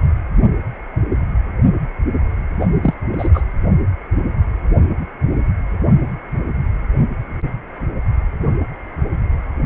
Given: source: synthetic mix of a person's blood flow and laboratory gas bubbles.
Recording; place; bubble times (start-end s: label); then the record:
Doppler ultrasound of blood flow; precordium
2.59-2.67 s: bubbles
2.81-2.94 s: bubbles
3.12-3.30 s: bubbles
3.34-3.42 s: bubbles
From the record:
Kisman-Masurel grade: 213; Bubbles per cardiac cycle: several, 3 to 8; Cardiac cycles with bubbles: 1 to 10%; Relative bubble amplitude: loud (0.450 to 0.775); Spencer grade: 1 (occasional bubble signal discernible with the cardiac motion signal, with majority of cardiac periods free of bubbles); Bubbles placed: anywhere in the cardiac cycle